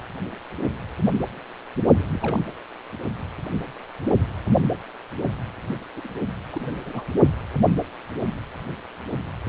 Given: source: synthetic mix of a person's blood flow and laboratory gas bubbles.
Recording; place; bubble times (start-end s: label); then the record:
Doppler ultrasound of blood flow; precordium
1.99-2.03 s: bubbles
2.13-2.43 s: bubbles
2.47-2.53 s: bubbles
5.96-6.08 s: bubbles
6.53-6.83 s: bubbles
6.86-7.04 s: bubbles
From the record:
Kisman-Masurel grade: 221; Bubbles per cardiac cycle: several, 3 to 8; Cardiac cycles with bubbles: 10 to 50%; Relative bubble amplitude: barely perceptible (0.100 to 0.250); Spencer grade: 2 (many but less than half of the cardiac periods contain bubble signals, singularly or in groups); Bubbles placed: only in the low amplitude regions of the cardiac cycle